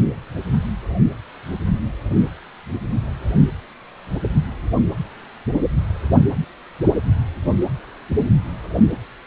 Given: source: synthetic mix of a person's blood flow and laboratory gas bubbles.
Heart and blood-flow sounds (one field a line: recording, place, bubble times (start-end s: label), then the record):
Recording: Doppler ultrasound of blood flow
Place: precordium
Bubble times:
no bubbles
From the record:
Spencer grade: 0 (complete lack of bubble signals)